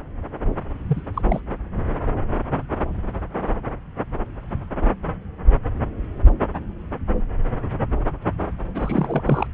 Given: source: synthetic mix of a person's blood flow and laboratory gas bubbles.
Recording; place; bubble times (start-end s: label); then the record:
Doppler ultrasound of blood flow; subclavian vein
0.88-1.02 s: bubbles
1.14-1.22 s: bubbles
1.28-1.41 s: bubbles
8.74-9.46 s: bubbles
From the record:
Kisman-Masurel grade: 222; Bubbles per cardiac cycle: several, 3 to 8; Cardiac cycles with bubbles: 10 to 50%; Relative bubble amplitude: moderate (0.250 to 0.450); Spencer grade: 2 (many but less than half of the cardiac periods contain bubble signals, singularly or in groups); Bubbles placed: anywhere in the cardiac cycle